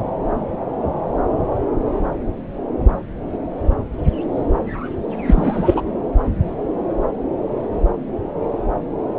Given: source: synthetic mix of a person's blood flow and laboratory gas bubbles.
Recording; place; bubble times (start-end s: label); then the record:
Doppler ultrasound of blood flow; subclavian vein
5.27-5.82 s: bubbles
From the record:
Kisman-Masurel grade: 213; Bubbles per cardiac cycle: several, 3 to 8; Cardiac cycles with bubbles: 1 to 10%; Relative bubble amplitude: loud (0.450 to 0.775); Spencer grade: 1 (occasional bubble signal discernible with the cardiac motion signal, with majority of cardiac periods free of bubbles); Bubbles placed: anywhere in the cardiac cycle